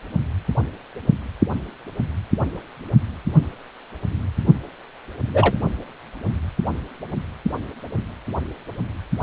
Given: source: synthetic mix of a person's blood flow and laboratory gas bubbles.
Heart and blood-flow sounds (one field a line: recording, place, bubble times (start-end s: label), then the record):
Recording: Doppler ultrasound of blood flow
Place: precordium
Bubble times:
5.33-5.57 s: bubbles
From the record:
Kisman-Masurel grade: 113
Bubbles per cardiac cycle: 1 to 2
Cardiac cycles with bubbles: 1 to 10%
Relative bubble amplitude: loud (0.450 to 0.775)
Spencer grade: 1 (occasional bubble signal discernible with the cardiac motion signal, with majority of cardiac periods free of bubbles)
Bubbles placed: only in the low amplitude regions of the cardiac cycle